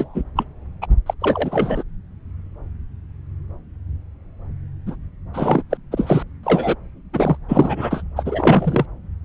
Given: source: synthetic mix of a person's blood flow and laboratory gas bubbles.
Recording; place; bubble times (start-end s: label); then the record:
Doppler ultrasound of blood flow; subclavian vein
0.00-0.23 s: bubbles
0.35-0.45 s: bubbles
0.82-0.86 s: bubbles
1.06-1.14 s: bubbles
1.19-1.83 s: bubbles
4.87-4.96 s: bubbles
5.33-5.62 s: bubbles
5.70-5.77 s: bubbles
5.92-6.23 s: bubbles
6.43-6.75 s: bubbles
7.13-7.37 s: bubbles
7.48-8.02 s: bubbles
8.16-8.86 s: bubbles
From the record:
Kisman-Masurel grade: 333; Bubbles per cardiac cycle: rolling drumbeat, 9 or more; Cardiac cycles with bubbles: 50 to 99%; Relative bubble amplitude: loud (0.450 to 0.775); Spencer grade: 3 (all of the cardiac periods contain showers or single bubble signals, but not dominating or overriding the cardiac motion signals); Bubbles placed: anywhere in the cardiac cycle